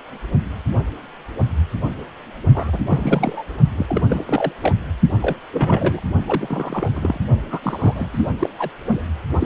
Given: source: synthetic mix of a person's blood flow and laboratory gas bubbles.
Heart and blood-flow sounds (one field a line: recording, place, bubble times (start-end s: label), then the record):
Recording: Doppler ultrasound of blood flow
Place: precordium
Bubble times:
2.54-2.78 s: bubbles
2.87-3.44 s: bubbles
3.77-3.86 s: bubbles
3.89-4.02 s: bubbles
4.09-4.24 s: bubbles
4.27-4.53 s: bubbles
4.62-4.74 s: bubbles
5.21-5.37 s: bubbles
5.53-6.01 s: bubbles
6.26-6.88 s: bubbles
6.93-7.20 s: bubbles
7.50-8.30 s: bubbles
8.39-8.49 s: bubbles
8.58-8.70 s: bubbles
8.88-9.02 s: bubbles
9.38-9.46 s: bubbles
From the record:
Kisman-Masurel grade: 332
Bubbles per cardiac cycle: rolling drumbeat, 9 or more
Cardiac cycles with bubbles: 50 to 99%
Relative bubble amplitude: moderate (0.250 to 0.450)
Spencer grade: 3 (all of the cardiac periods contain showers or single bubble signals, but not dominating or overriding the cardiac motion signals)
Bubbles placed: only in the low amplitude regions of the cardiac cycle